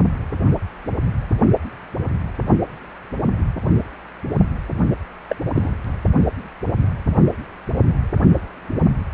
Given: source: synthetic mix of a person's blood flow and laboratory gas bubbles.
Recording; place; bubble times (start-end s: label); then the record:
Doppler ultrasound of blood flow; precordium
5.29-5.36 s: bubbles
5.53-5.74 s: bubbles
From the record:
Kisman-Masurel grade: 112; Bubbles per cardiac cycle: 1 to 2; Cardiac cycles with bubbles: 1 to 10%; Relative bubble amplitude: moderate (0.250 to 0.450); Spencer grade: 1 (occasional bubble signal discernible with the cardiac motion signal, with majority of cardiac periods free of bubbles); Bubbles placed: only in the low amplitude regions of the cardiac cycle